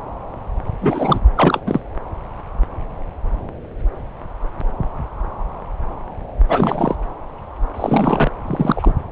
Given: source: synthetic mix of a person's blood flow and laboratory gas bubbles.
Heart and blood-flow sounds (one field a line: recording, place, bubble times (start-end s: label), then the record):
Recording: Doppler ultrasound of blood flow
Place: subclavian vein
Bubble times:
0.81-1.19 s: bubbles
1.35-1.60 s: bubbles
1.66-1.81 s: bubbles
6.49-6.96 s: bubbles
7.76-8.30 s: bubbles
8.46-8.94 s: bubbles
From the record:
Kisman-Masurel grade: 223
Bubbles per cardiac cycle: several, 3 to 8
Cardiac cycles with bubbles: 10 to 50%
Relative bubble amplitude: loud (0.450 to 0.775)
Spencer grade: 2 (many but less than half of the cardiac periods contain bubble signals, singularly or in groups)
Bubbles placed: anywhere in the cardiac cycle